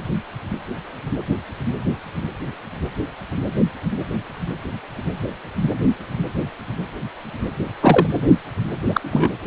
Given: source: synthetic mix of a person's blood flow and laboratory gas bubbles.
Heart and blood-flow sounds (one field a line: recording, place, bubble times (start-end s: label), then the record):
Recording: Doppler ultrasound of blood flow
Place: precordium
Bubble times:
7.82-8.06 s: bubbles
8.89-9.31 s: bubbles
From the record:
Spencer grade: 1 (occasional bubble signal discernible with the cardiac motion signal, with majority of cardiac periods free of bubbles)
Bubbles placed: anywhere in the cardiac cycle